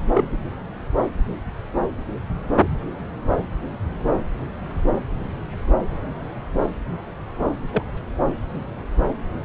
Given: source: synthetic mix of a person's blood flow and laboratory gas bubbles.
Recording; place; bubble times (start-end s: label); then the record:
Doppler ultrasound of blood flow; subclavian vein
0.15-0.25 s: bubbles
0.32-0.38 s: bubbles
7.72-7.83 s: bubbles
From the record:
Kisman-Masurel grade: 112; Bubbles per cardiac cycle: 1 to 2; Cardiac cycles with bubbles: 1 to 10%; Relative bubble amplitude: moderate (0.250 to 0.450); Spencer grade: 1 (occasional bubble signal discernible with the cardiac motion signal, with majority of cardiac periods free of bubbles); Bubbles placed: anywhere in the cardiac cycle